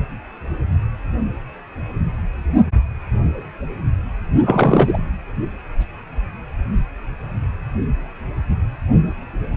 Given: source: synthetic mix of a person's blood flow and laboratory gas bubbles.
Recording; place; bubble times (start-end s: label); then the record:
Doppler ultrasound of blood flow; precordium
4.41-5.01 s: bubbles
From the record:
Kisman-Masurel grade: 213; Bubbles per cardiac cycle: several, 3 to 8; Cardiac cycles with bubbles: 1 to 10%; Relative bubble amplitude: loud (0.450 to 0.775); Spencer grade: 1 (occasional bubble signal discernible with the cardiac motion signal, with majority of cardiac periods free of bubbles); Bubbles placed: anywhere in the cardiac cycle